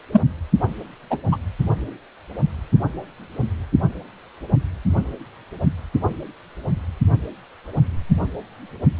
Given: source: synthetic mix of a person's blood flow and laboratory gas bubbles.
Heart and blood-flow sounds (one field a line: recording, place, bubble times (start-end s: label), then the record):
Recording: Doppler ultrasound of blood flow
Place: precordium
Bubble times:
0.12-0.22 s: bubbles
1.10-1.19 s: bubbles
1.31-1.37 s: bubbles
From the record:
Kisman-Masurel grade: 123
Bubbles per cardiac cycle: 1 to 2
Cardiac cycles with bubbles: 10 to 50%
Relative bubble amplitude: loud (0.450 to 0.775)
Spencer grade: 2 (many but less than half of the cardiac periods contain bubble signals, singularly or in groups)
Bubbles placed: only in the low amplitude regions of the cardiac cycle